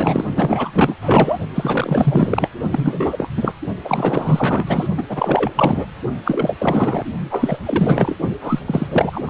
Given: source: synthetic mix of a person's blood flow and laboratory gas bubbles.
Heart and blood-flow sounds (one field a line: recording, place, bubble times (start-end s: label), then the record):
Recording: Doppler ultrasound of blood flow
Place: precordium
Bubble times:
0.00-0.24 s: bubbles
0.36-0.95 s: bubbles
1.02-1.38 s: bubbles
1.54-2.48 s: bubbles
2.70-3.29 s: bubbles
3.36-3.53 s: bubbles
3.84-4.87 s: bubbles
4.97-5.03 s: bubbles
5.08-5.51 s: bubbles
5.55-5.87 s: bubbles
6.25-6.54 s: bubbles
6.58-7.04 s: bubbles
7.30-7.58 s: bubbles
7.63-8.16 s: bubbles
8.41-8.59 s: bubbles
8.66-8.88 s: bubbles
8.91-9.21 s: bubbles
9.27-9.30 s: bubbles
From the record:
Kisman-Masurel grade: 444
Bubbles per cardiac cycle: continuous sound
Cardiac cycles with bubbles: 100%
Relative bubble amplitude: maximal (0.775 to 0.999)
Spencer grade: 4 (maximum detectable bubble signal sounding continuously throughout systole and diastole of every cardiac period, and overriding the amplitude of the normal cardiac signals)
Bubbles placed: only in the low amplitude regions of the cardiac cycle